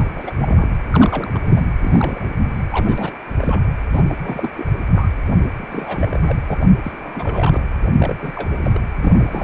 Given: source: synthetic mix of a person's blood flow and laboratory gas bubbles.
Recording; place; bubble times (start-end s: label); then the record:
Doppler ultrasound of blood flow; precordium
0.00-0.67 s: bubbles
0.91-1.64 s: bubbles
1.81-2.37 s: bubbles
2.72-3.12 s: bubbles
3.37-3.69 s: bubbles
3.92-4.04 s: bubbles
4.09-4.19 s: bubbles
4.22-4.51 s: bubbles
4.56-4.67 s: bubbles
4.93-5.09 s: bubbles
5.25-5.38 s: bubbles
5.42-5.50 s: bubbles
5.57-6.39 s: bubbles
6.47-6.66 s: bubbles
6.83-7.60 s: bubbles
7.98-8.16 s: bubbles
8.21-8.33 s: bubbles
8.36-8.50 s: bubbles
8.61-8.80 s: bubbles
8.95-9.43 s: bubbles
From the record:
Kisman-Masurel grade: 342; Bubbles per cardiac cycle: rolling drumbeat, 9 or more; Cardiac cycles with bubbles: 100%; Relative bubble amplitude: moderate (0.250 to 0.450); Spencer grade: 3 (all of the cardiac periods contain showers or single bubble signals, but not dominating or overriding the cardiac motion signals); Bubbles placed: anywhere in the cardiac cycle